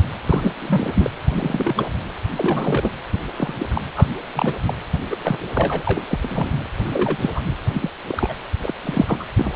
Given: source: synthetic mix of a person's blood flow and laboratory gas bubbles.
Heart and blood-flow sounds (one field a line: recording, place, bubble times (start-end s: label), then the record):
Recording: Doppler ultrasound of blood flow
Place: precordium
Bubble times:
0.22-0.55 s: bubbles
0.58-1.10 s: bubbles
1.29-1.89 s: bubbles
2.35-2.91 s: bubbles
3.12-3.24 s: bubbles
3.36-3.54 s: bubbles
3.58-3.67 s: bubbles
3.69-3.82 s: bubbles
3.96-4.07 s: bubbles
4.36-4.56 s: bubbles
4.66-4.74 s: bubbles
5.11-5.17 s: bubbles
5.24-5.39 s: bubbles
5.54-5.83 s: bubbles
5.87-6.02 s: bubbles
6.08-6.66 s: bubbles
6.86-7.30 s: bubbles
7.34-7.41 s: bubbles
7.73-7.90 s: bubbles
8.09-8.34 s: bubbles
8.61-8.73 s: bubbles
8.84-9.23 s: bubbles
9.37-9.55 s: bubbles
From the record:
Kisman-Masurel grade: 242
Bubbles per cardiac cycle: several, 3 to 8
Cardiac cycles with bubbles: 100%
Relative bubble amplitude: moderate (0.250 to 0.450)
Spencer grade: 3 (all of the cardiac periods contain showers or single bubble signals, but not dominating or overriding the cardiac motion signals)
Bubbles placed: anywhere in the cardiac cycle